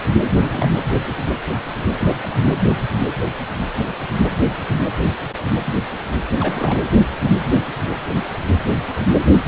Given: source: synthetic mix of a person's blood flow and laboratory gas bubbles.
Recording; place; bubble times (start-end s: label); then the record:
Doppler ultrasound of blood flow; precordium
0.36-0.68 s: bubbles
1.99-2.27 s: bubbles
6.40-6.84 s: bubbles
From the record:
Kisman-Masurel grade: 221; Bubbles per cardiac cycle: several, 3 to 8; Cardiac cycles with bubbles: 10 to 50%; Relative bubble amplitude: barely perceptible (0.100 to 0.250); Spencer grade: 2 (many but less than half of the cardiac periods contain bubble signals, singularly or in groups); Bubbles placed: anywhere in the cardiac cycle